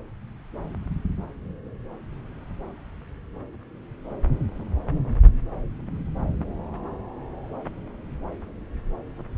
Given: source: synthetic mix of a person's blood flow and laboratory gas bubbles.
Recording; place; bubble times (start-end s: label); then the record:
Doppler ultrasound of blood flow; subclavian vein
no bubbles
From the record:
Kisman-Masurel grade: 000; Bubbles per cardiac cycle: 0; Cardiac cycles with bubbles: 0%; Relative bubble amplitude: no bubbles discernible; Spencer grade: 0 (complete lack of bubble signals)